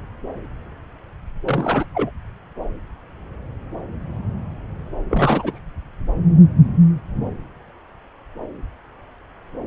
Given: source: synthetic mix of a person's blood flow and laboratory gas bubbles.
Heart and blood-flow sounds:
Doppler ultrasound of blood flow; subclavian vein
1.46-1.85 s: bubbles
1.94-2.10 s: bubbles
5.10-5.59 s: bubbles
From the record:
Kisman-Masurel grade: 212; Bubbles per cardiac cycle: several, 3 to 8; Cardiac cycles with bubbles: 1 to 10%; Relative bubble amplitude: moderate (0.250 to 0.450); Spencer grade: 1 (occasional bubble signal discernible with the cardiac motion signal, with majority of cardiac periods free of bubbles); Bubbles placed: anywhere in the cardiac cycle

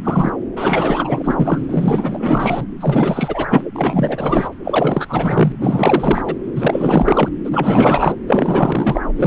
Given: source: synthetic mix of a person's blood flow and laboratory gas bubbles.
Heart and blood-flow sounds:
Doppler ultrasound of blood flow; subclavian vein
0.03-0.32 s: bubbles
0.56-1.65 s: bubbles
1.69-2.66 s: bubbles
2.81-3.47 s: bubbles
3.50-3.67 s: bubbles
3.75-4.49 s: bubbles
4.64-5.53 s: bubbles
5.58-6.22 s: bubbles
6.25-6.36 s: bubbles
6.56-7.29 s: bubbles
7.44-8.15 s: bubbles
8.26-9.01 s: bubbles
9.16-9.27 s: bubbles
From the record:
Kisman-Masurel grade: 444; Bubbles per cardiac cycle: continuous sound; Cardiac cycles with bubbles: 100%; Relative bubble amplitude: maximal (0.775 to 0.999); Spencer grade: 4 (maximum detectable bubble signal sounding continuously throughout systole and diastole of every cardiac period, and overriding the amplitude of the normal cardiac signals); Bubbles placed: anywhere in the cardiac cycle

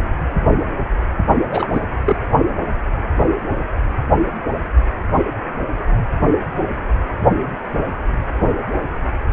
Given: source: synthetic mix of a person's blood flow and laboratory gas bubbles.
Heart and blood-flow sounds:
Doppler ultrasound of blood flow; precordium
1.48-1.67 s: bubbles
1.71-1.80 s: bubbles
2.05-2.17 s: bubbles
From the record:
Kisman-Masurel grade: 213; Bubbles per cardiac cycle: several, 3 to 8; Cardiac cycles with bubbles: 1 to 10%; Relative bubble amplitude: loud (0.450 to 0.775); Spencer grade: 1 (occasional bubble signal discernible with the cardiac motion signal, with majority of cardiac periods free of bubbles); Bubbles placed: only in the low amplitude regions of the cardiac cycle

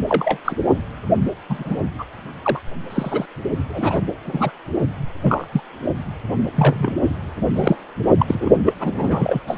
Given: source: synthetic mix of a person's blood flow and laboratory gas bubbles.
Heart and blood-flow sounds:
Doppler ultrasound of blood flow; precordium
0.09-0.38 s: bubbles
0.45-0.55 s: bubbles
1.49-1.81 s: bubbles
1.99-2.05 s: bubbles
2.43-2.60 s: bubbles
2.90-3.26 s: bubbles
3.69-4.02 s: bubbles
4.24-4.52 s: bubbles
5.23-5.46 s: bubbles
5.53-5.61 s: bubbles
6.54-6.92 s: bubbles
7.54-7.76 s: bubbles
8.18-8.49 s: bubbles
8.65-8.73 s: bubbles
8.79-9.42 s: bubbles
9.47-9.58 s: bubbles
From the record:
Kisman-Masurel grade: 242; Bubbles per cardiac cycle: several, 3 to 8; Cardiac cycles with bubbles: 100%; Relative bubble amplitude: moderate (0.250 to 0.450); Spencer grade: 3 (all of the cardiac periods contain showers or single bubble signals, but not dominating or overriding the cardiac motion signals); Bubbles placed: only in the low amplitude regions of the cardiac cycle

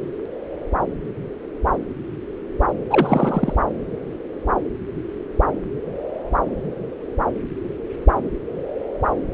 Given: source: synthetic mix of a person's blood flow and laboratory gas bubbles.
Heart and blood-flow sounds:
Doppler ultrasound of blood flow; subclavian vein
2.91-3.53 s: bubbles
From the record:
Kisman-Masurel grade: 212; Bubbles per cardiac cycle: several, 3 to 8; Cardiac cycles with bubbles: 1 to 10%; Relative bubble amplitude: moderate (0.250 to 0.450); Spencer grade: 1 (occasional bubble signal discernible with the cardiac motion signal, with majority of cardiac periods free of bubbles); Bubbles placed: anywhere in the cardiac cycle

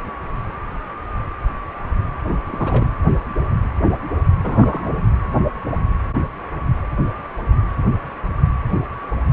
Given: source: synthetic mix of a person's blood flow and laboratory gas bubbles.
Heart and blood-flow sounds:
Doppler ultrasound of blood flow; precordium
2.24-2.38 s: bubbles
2.48-2.92 s: bubbles
4.40-4.92 s: bubbles
From the record:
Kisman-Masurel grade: 221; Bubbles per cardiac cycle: several, 3 to 8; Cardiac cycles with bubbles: 10 to 50%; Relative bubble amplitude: barely perceptible (0.100 to 0.250); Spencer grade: 2 (many but less than half of the cardiac periods contain bubble signals, singularly or in groups); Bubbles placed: anywhere in the cardiac cycle

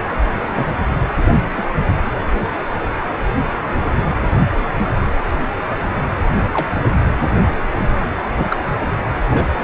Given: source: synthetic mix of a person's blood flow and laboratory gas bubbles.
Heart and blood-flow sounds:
Doppler ultrasound of blood flow; precordium
0.50-0.65 s: bubbles
1.57-1.62 s: bubbles
6.53-6.67 s: bubbles
8.38-8.46 s: bubbles
8.50-8.57 s: bubbles
9.30-9.49 s: bubbles
From the record:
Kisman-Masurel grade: 122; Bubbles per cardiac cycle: 1 to 2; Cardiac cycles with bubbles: 10 to 50%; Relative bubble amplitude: moderate (0.250 to 0.450); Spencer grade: 2 (many but less than half of the cardiac periods contain bubble signals, singularly or in groups); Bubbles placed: anywhere in the cardiac cycle

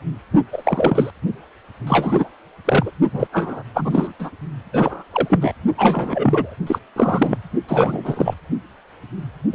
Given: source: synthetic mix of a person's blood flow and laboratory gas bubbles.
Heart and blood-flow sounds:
Doppler ultrasound of blood flow; precordium
0.52-1.10 s: bubbles
1.86-2.29 s: bubbles
2.65-2.92 s: bubbles
3.10-3.27 s: bubbles
3.32-3.63 s: bubbles
3.74-4.12 s: bubbles
4.19-4.30 s: bubbles
4.73-5.03 s: bubbles
5.12-5.53 s: bubbles
5.78-6.56 s: bubbles
6.67-6.79 s: bubbles
6.96-7.38 s: bubbles
7.68-8.35 s: bubbles
9.52-9.55 s: bubbles
From the record:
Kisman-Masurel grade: 333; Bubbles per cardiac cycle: rolling drumbeat, 9 or more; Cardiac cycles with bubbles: 50 to 99%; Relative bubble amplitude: loud (0.450 to 0.775); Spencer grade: 3 (all of the cardiac periods contain showers or single bubble signals, but not dominating or overriding the cardiac motion signals); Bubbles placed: only in the low amplitude regions of the cardiac cycle

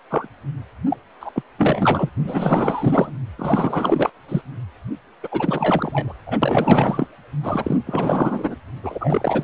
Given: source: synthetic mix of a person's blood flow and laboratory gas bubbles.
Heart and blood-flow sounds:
Doppler ultrasound of blood flow; precordium
0.10-0.27 s: bubbles
0.90-0.97 s: bubbles
1.20-1.32 s: bubbles
1.34-1.43 s: bubbles
1.58-2.09 s: bubbles
2.27-3.11 s: bubbles
3.38-4.10 s: bubbles
4.28-4.42 s: bubbles
5.22-5.29 s: bubbles
5.31-6.14 s: bubbles
6.26-6.40 s: bubbles
6.42-7.07 s: bubbles
7.42-7.77 s: bubbles
7.86-8.55 s: bubbles
8.82-9.44 s: bubbles
From the record:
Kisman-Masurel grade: 444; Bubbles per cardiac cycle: continuous sound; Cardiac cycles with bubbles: 100%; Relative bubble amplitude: maximal (0.775 to 0.999); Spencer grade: 4 (maximum detectable bubble signal sounding continuously throughout systole and diastole of every cardiac period, and overriding the amplitude of the normal cardiac signals); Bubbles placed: anywhere in the cardiac cycle

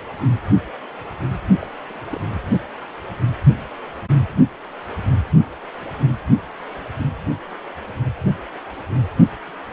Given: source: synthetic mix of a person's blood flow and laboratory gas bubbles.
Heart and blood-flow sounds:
Doppler ultrasound of blood flow; precordium
1.60-1.67 s: bubbles
1.87-2.03 s: bubbles
2.10-2.19 s: bubbles
2.34-2.43 s: bubbles
From the record:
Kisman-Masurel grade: 211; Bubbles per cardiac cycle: several, 3 to 8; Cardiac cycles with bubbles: 1 to 10%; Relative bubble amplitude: barely perceptible (0.100 to 0.250); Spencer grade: 1 (occasional bubble signal discernible with the cardiac motion signal, with majority of cardiac periods free of bubbles); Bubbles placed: only in the low amplitude regions of the cardiac cycle

